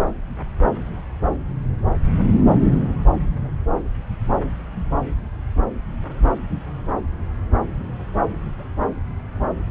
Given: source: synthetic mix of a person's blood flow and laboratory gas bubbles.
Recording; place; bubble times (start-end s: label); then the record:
Doppler ultrasound of blood flow; subclavian vein
0.00-0.05 s: bubbles
From the record:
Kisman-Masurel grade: 111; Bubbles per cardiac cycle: 1 to 2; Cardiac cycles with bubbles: 1 to 10%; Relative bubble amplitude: barely perceptible (0.100 to 0.250); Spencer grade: 1 (occasional bubble signal discernible with the cardiac motion signal, with majority of cardiac periods free of bubbles); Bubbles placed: anywhere in the cardiac cycle